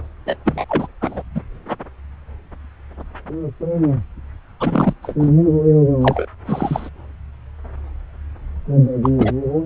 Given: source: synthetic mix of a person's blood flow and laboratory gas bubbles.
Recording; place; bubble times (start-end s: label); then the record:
Doppler ultrasound of blood flow; subclavian vein
0.26-0.36 s: bubbles
0.45-0.65 s: bubbles
0.69-0.87 s: bubbles
1.01-1.23 s: bubbles
1.34-1.41 s: bubbles
4.60-4.94 s: bubbles
5.03-5.15 s: bubbles
5.19-5.31 s: bubbles
6.01-6.26 s: bubbles
6.47-6.90 s: bubbles
9.03-9.10 s: bubbles
9.18-9.33 s: bubbles
From the record:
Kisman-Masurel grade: 223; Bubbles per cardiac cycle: several, 3 to 8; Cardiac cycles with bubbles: 10 to 50%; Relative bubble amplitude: loud (0.450 to 0.775); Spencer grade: 2 (many but less than half of the cardiac periods contain bubble signals, singularly or in groups); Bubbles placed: anywhere in the cardiac cycle